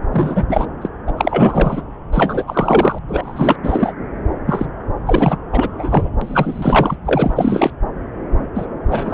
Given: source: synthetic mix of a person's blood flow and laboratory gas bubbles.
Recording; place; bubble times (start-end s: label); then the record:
Doppler ultrasound of blood flow; subclavian vein
0.12-0.46 s: bubbles
0.49-0.66 s: bubbles
0.81-0.88 s: bubbles
1.07-1.12 s: bubbles
1.17-1.82 s: bubbles
2.12-2.44 s: bubbles
2.47-2.99 s: bubbles
3.08-3.56 s: bubbles
3.63-3.93 s: bubbles
4.46-4.66 s: bubbles
5.07-5.38 s: bubbles
5.52-6.10 s: bubbles
6.21-6.96 s: bubbles
7.05-7.71 s: bubbles
8.54-8.66 s: bubbles
8.85-9.13 s: bubbles
From the record:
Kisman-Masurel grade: 343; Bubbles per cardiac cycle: rolling drumbeat, 9 or more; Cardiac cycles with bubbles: 100%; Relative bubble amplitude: loud (0.450 to 0.775); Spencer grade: 3 (all of the cardiac periods contain showers or single bubble signals, but not dominating or overriding the cardiac motion signals); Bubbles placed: anywhere in the cardiac cycle